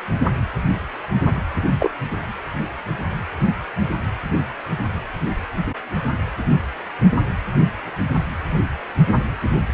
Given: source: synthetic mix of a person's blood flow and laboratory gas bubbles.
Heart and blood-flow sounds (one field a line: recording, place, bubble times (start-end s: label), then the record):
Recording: Doppler ultrasound of blood flow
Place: precordium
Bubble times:
1.79-1.90 s: bubbles
From the record:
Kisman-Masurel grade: 112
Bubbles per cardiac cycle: 1 to 2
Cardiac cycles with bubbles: 1 to 10%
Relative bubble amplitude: moderate (0.250 to 0.450)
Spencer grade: 1 (occasional bubble signal discernible with the cardiac motion signal, with majority of cardiac periods free of bubbles)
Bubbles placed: anywhere in the cardiac cycle